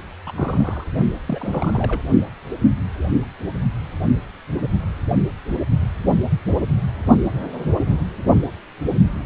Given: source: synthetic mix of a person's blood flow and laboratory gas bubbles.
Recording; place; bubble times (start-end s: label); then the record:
Doppler ultrasound of blood flow; precordium
0.27-0.32 s: bubbles
0.35-0.84 s: bubbles
1.26-2.01 s: bubbles
From the record:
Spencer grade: 2 (many but less than half of the cardiac periods contain bubble signals, singularly or in groups); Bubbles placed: only in the low amplitude regions of the cardiac cycle